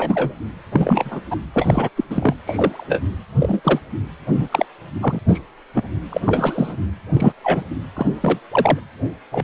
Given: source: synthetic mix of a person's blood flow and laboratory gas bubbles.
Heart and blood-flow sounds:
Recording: Doppler ultrasound of blood flow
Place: precordium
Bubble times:
0.00-0.34 s: bubbles
0.72-1.21 s: bubbles
1.31-1.36 s: bubbles
1.54-1.90 s: bubbles
1.96-2.04 s: bubbles
2.09-2.34 s: bubbles
2.44-2.99 s: bubbles
3.39-3.60 s: bubbles
3.63-3.80 s: bubbles
4.26-4.48 s: bubbles
4.51-4.66 s: bubbles
5.02-5.20 s: bubbles
5.28-5.40 s: bubbles
5.74-5.83 s: bubbles
6.10-6.21 s: bubbles
6.25-6.77 s: bubbles
7.13-7.33 s: bubbles
7.43-7.64 s: bubbles
7.95-8.06 s: bubbles
8.21-8.39 s: bubbles
8.52-8.79 s: bubbles
9.31-9.44 s: bubbles
From the record:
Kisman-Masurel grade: 243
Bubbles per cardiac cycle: several, 3 to 8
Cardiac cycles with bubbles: 100%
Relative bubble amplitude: loud (0.450 to 0.775)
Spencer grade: 3 (all of the cardiac periods contain showers or single bubble signals, but not dominating or overriding the cardiac motion signals)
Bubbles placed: anywhere in the cardiac cycle

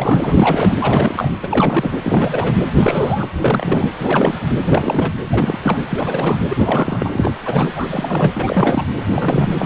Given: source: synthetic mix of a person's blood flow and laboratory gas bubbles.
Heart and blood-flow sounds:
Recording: Doppler ultrasound of blood flow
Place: precordium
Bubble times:
0.00-0.74 s: bubbles
0.79-1.31 s: bubbles
1.40-1.99 s: bubbles
2.03-2.54 s: bubbles
2.79-3.27 s: bubbles
3.35-3.90 s: bubbles
4.02-4.39 s: bubbles
4.64-5.12 s: bubbles
5.27-5.58 s: bubbles
5.62-5.78 s: bubbles
5.90-6.39 s: bubbles
6.49-7.10 s: bubbles
7.15-7.31 s: bubbles
7.46-7.69 s: bubbles
7.75-7.87 s: bubbles
7.90-8.32 s: bubbles
8.34-8.87 s: bubbles
9.09-9.50 s: bubbles
9.54-9.66 s: bubbles
From the record:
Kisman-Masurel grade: 343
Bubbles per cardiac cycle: rolling drumbeat, 9 or more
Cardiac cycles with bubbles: 100%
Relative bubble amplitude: loud (0.450 to 0.775)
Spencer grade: 3 (all of the cardiac periods contain showers or single bubble signals, but not dominating or overriding the cardiac motion signals)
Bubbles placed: anywhere in the cardiac cycle

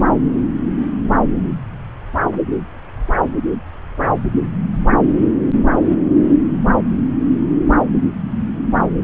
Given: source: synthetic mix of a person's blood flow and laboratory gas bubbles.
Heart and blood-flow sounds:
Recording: Doppler ultrasound of blood flow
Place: subclavian vein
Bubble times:
no bubbles
From the record:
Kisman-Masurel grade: 000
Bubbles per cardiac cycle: 0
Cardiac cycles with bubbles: 0%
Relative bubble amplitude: no bubbles discernible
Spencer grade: 0 (complete lack of bubble signals)

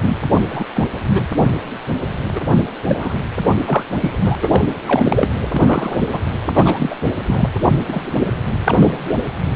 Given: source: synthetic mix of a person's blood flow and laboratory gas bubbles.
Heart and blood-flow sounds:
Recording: Doppler ultrasound of blood flow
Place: precordium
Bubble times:
0.00-0.17 s: bubbles
0.51-0.64 s: bubbles
0.73-0.84 s: bubbles
1.04-1.26 s: bubbles
2.35-2.65 s: bubbles
2.86-3.19 s: bubbles
3.67-3.83 s: bubbles
4.00-4.11 s: bubbles
4.24-4.36 s: bubbles
4.41-4.65 s: bubbles
4.86-5.29 s: bubbles
5.51-5.98 s: bubbles
6.01-6.07 s: bubbles
6.12-6.19 s: bubbles
6.55-6.96 s: bubbles
7.04-7.12 s: bubbles
7.26-7.50 s: bubbles
7.62-7.73 s: bubbles
7.88-8.04 s: bubbles
8.64-9.16 s: bubbles
From the record:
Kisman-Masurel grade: 233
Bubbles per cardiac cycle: several, 3 to 8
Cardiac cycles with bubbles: 50 to 99%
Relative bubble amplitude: loud (0.450 to 0.775)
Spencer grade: 3 (all of the cardiac periods contain showers or single bubble signals, but not dominating or overriding the cardiac motion signals)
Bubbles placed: anywhere in the cardiac cycle

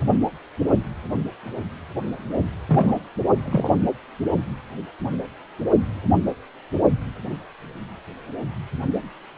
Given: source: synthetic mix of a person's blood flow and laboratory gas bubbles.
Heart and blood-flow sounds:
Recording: Doppler ultrasound of blood flow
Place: precordium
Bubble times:
2.69-2.94 s: bubbles
3.45-3.70 s: bubbles
From the record:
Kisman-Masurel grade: 122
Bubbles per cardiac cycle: 1 to 2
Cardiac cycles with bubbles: 10 to 50%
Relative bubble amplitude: moderate (0.250 to 0.450)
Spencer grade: 2 (many but less than half of the cardiac periods contain bubble signals, singularly or in groups)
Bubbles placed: only in the low amplitude regions of the cardiac cycle

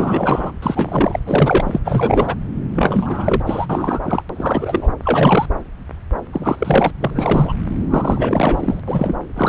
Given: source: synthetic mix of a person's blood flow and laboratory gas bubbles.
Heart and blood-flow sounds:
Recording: Doppler ultrasound of blood flow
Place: subclavian vein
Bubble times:
0.00-0.52 s: bubbles
0.62-1.20 s: bubbles
1.25-1.79 s: bubbles
1.84-2.35 s: bubbles
2.75-3.42 s: bubbles
3.46-3.66 s: bubbles
3.69-4.00 s: bubbles
4.04-4.22 s: bubbles
4.35-4.88 s: bubbles
5.04-5.47 s: bubbles
6.33-6.91 s: bubbles
7.00-7.54 s: bubbles
7.89-8.80 s: bubbles
8.88-9.17 s: bubbles
9.35-9.49 s: bubbles
From the record:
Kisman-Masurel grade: 333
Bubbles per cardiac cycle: rolling drumbeat, 9 or more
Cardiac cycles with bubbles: 50 to 99%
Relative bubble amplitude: loud (0.450 to 0.775)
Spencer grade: 3 (all of the cardiac periods contain showers or single bubble signals, but not dominating or overriding the cardiac motion signals)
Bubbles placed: anywhere in the cardiac cycle

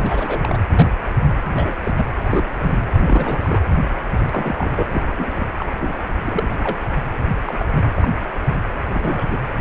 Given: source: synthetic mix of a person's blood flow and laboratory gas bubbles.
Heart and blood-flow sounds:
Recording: Doppler ultrasound of blood flow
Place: precordium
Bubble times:
0.00-0.58 s: bubbles
0.70-0.89 s: bubbles
1.08-1.33 s: bubbles
1.52-1.75 s: bubbles
1.83-1.91 s: bubbles
1.97-2.07 s: bubbles
2.22-2.45 s: bubbles
2.53-2.81 s: bubbles
2.94-3.60 s: bubbles
4.19-4.87 s: bubbles
4.89-5.02 s: bubbles
5.18-5.31 s: bubbles
5.36-5.50 s: bubbles
5.58-5.66 s: bubbles
5.81-5.93 s: bubbles
6.22-6.88 s: bubbles
7.45-7.65 s: bubbles
7.70-7.90 s: bubbles
7.94-8.23 s: bubbles
8.48-8.59 s: bubbles
8.85-9.38 s: bubbles
From the record:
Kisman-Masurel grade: 242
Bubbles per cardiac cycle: several, 3 to 8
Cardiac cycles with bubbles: 100%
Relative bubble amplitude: moderate (0.250 to 0.450)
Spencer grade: 3 (all of the cardiac periods contain showers or single bubble signals, but not dominating or overriding the cardiac motion signals)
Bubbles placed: anywhere in the cardiac cycle

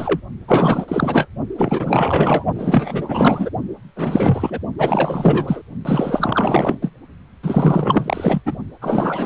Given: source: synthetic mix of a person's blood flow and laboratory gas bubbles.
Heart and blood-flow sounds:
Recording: Doppler ultrasound of blood flow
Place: precordium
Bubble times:
0.00-0.20 s: bubbles
0.47-1.27 s: bubbles
1.57-2.45 s: bubbles
2.54-3.50 s: bubbles
3.96-4.59 s: bubbles
4.78-5.62 s: bubbles
5.85-6.77 s: bubbles
6.81-6.90 s: bubbles
7.42-8.41 s: bubbles
8.46-8.57 s: bubbles
8.81-9.26 s: bubbles
From the record:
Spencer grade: 4 (maximum detectable bubble signal sounding continuously throughout systole and diastole of every cardiac period, and overriding the amplitude of the normal cardiac signals)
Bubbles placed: only in the low amplitude regions of the cardiac cycle

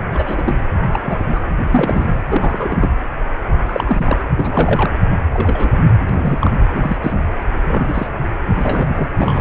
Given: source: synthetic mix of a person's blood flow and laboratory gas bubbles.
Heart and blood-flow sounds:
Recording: Doppler ultrasound of blood flow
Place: precordium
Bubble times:
0.11-0.56 s: bubbles
0.92-0.99 s: bubbles
1.02-1.25 s: bubbles
1.32-1.40 s: bubbles
1.60-2.06 s: bubbles
2.30-2.89 s: bubbles
3.67-4.18 s: bubbles
4.37-4.91 s: bubbles
5.30-5.72 s: bubbles
6.09-6.50 s: bubbles
6.74-6.96 s: bubbles
7.01-7.21 s: bubbles
7.59-8.07 s: bubbles
8.60-9.08 s: bubbles
9.18-9.41 s: bubbles
From the record:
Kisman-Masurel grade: 242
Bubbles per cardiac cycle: several, 3 to 8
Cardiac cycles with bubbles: 100%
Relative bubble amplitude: moderate (0.250 to 0.450)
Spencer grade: 3 (all of the cardiac periods contain showers or single bubble signals, but not dominating or overriding the cardiac motion signals)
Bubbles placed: anywhere in the cardiac cycle

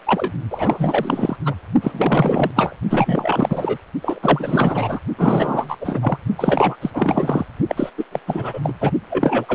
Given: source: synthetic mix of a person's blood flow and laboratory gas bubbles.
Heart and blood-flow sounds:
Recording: Doppler ultrasound of blood flow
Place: precordium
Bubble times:
0.06-0.32 s: bubbles
0.50-1.36 s: bubbles
1.45-1.54 s: bubbles
1.82-2.51 s: bubbles
2.54-2.75 s: bubbles
2.90-3.77 s: bubbles
4.01-5.00 s: bubbles
5.17-5.76 s: bubbles
5.81-6.18 s: bubbles
6.38-6.76 s: bubbles
6.81-6.90 s: bubbles
6.93-7.46 s: bubbles
7.68-7.90 s: bubbles
7.98-8.05 s: bubbles
8.12-8.20 s: bubbles
8.27-8.61 s: bubbles
8.63-8.73 s: bubbles
8.81-8.91 s: bubbles
9.10-9.46 s: bubbles
9.48-9.54 s: bubbles
From the record:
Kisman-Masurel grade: 444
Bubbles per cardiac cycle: continuous sound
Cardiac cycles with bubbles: 100%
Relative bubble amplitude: maximal (0.775 to 0.999)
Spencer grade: 4 (maximum detectable bubble signal sounding continuously throughout systole and diastole of every cardiac period, and overriding the amplitude of the normal cardiac signals)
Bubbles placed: only in the low amplitude regions of the cardiac cycle

